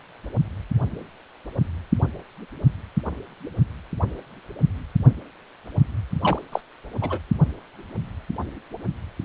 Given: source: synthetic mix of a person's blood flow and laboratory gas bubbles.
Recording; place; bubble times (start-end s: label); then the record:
Doppler ultrasound of blood flow; precordium
6.21-6.38 s: bubbles
6.52-6.61 s: bubbles
7.01-7.18 s: bubbles
From the record:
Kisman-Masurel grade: 212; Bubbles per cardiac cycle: several, 3 to 8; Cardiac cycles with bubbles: 1 to 10%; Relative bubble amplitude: moderate (0.250 to 0.450); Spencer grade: 1 (occasional bubble signal discernible with the cardiac motion signal, with majority of cardiac periods free of bubbles); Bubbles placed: only in the low amplitude regions of the cardiac cycle